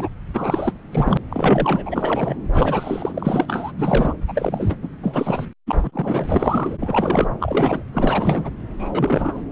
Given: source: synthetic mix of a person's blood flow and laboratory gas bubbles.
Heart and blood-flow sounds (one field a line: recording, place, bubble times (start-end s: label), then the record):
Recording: Doppler ultrasound of blood flow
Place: subclavian vein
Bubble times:
0.00-0.08 s: bubbles
0.34-0.73 s: bubbles
0.92-1.18 s: bubbles
1.30-1.82 s: bubbles
1.85-2.36 s: bubbles
2.54-3.72 s: bubbles
3.77-4.14 s: bubbles
4.28-4.75 s: bubbles
4.81-4.88 s: bubbles
5.03-5.47 s: bubbles
5.67-5.81 s: bubbles
5.83-6.25 s: bubbles
6.29-6.77 s: bubbles
6.79-7.28 s: bubbles
7.40-7.83 s: bubbles
7.93-8.51 s: bubbles
8.79-9.41 s: bubbles
From the record:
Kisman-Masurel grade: 343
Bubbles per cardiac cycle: rolling drumbeat, 9 or more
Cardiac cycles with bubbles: 100%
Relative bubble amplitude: loud (0.450 to 0.775)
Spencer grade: 3 (all of the cardiac periods contain showers or single bubble signals, but not dominating or overriding the cardiac motion signals)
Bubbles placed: anywhere in the cardiac cycle